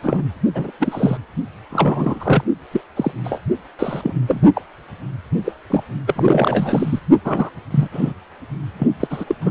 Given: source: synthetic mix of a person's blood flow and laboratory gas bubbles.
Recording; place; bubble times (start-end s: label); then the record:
Doppler ultrasound of blood flow; precordium
0.02-0.23 s: bubbles
0.54-0.71 s: bubbles
0.79-1.17 s: bubbles
1.70-2.44 s: bubbles
2.71-2.81 s: bubbles
2.96-3.12 s: bubbles
3.24-3.39 s: bubbles
3.79-4.14 s: bubbles
4.28-4.41 s: bubbles
4.55-4.62 s: bubbles
5.44-5.52 s: bubbles
5.70-5.84 s: bubbles
6.07-7.00 s: bubbles
7.25-7.50 s: bubbles
7.71-7.88 s: bubbles
7.92-8.13 s: bubbles
8.79-8.87 s: bubbles
9.00-9.08 s: bubbles
9.10-9.25 s: bubbles
9.27-9.35 s: bubbles
9.41-9.51 s: bubbles
From the record:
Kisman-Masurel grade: 242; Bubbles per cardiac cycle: several, 3 to 8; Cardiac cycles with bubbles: 100%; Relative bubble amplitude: moderate (0.250 to 0.450); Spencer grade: 3 (all of the cardiac periods contain showers or single bubble signals, but not dominating or overriding the cardiac motion signals); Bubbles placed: only in the low amplitude regions of the cardiac cycle